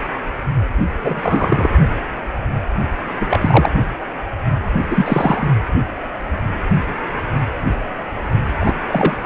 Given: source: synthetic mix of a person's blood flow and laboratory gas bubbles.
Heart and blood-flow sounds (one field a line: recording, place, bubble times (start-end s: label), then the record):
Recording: Doppler ultrasound of blood flow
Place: precordium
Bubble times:
1.02-1.70 s: bubbles
3.15-3.71 s: bubbles
4.90-5.49 s: bubbles
8.60-8.74 s: bubbles
8.88-9.17 s: bubbles
9.22-9.26 s: bubbles
From the record:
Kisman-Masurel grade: 223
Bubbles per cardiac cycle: several, 3 to 8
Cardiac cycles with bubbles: 10 to 50%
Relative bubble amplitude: loud (0.450 to 0.775)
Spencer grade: 2 (many but less than half of the cardiac periods contain bubble signals, singularly or in groups)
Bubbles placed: only in the low amplitude regions of the cardiac cycle